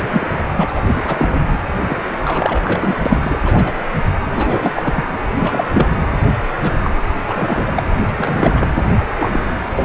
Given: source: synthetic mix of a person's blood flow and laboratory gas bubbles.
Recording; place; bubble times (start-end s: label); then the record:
Doppler ultrasound of blood flow; precordium
0.00-0.03 s: bubbles
0.12-0.28 s: bubbles
0.56-0.83 s: bubbles
0.94-1.04 s: bubbles
1.07-1.44 s: bubbles
1.52-1.58 s: bubbles
1.91-2.02 s: bubbles
2.19-2.98 s: bubbles
3.06-3.40 s: bubbles
3.45-3.73 s: bubbles
4.25-4.70 s: bubbles
4.75-5.04 s: bubbles
5.13-5.18 s: bubbles
5.41-5.64 s: bubbles
5.72-5.87 s: bubbles
6.61-6.91 s: bubbles
7.25-7.83 s: bubbles
8.09-8.68 s: bubbles
9.16-9.40 s: bubbles
9.73-9.85 s: bubbles
From the record:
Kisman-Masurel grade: 342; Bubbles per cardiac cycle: rolling drumbeat, 9 or more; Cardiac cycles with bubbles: 100%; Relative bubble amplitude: moderate (0.250 to 0.450); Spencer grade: 3 (all of the cardiac periods contain showers or single bubble signals, but not dominating or overriding the cardiac motion signals); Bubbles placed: anywhere in the cardiac cycle